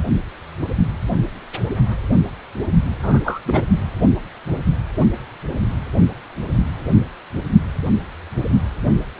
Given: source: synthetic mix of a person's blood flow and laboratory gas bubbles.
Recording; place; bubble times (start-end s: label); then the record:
Doppler ultrasound of blood flow; precordium
3.02-3.40 s: bubbles
3.46-3.63 s: bubbles
From the record:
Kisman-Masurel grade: 212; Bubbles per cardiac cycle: several, 3 to 8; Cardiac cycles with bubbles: 1 to 10%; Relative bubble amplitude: moderate (0.250 to 0.450); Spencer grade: 1 (occasional bubble signal discernible with the cardiac motion signal, with majority of cardiac periods free of bubbles); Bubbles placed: only in the low amplitude regions of the cardiac cycle